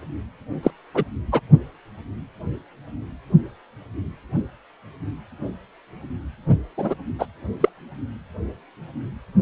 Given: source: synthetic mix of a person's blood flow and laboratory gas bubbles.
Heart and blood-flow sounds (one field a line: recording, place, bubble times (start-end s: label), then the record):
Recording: Doppler ultrasound of blood flow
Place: precordium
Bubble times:
0.62-0.70 s: bubbles
0.94-1.04 s: bubbles
1.31-1.40 s: bubbles
6.78-6.94 s: bubbles
7.19-7.26 s: bubbles
7.61-7.69 s: bubbles
From the record:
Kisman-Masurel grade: 223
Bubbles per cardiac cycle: several, 3 to 8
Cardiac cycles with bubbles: 10 to 50%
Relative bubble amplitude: loud (0.450 to 0.775)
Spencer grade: 2 (many but less than half of the cardiac periods contain bubble signals, singularly or in groups)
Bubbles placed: only in the low amplitude regions of the cardiac cycle